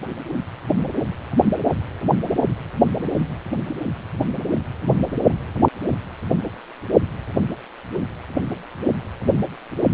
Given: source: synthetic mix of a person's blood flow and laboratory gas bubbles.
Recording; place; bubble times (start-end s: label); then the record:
Doppler ultrasound of blood flow; precordium
no bubbles
From the record:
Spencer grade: 0 (complete lack of bubble signals)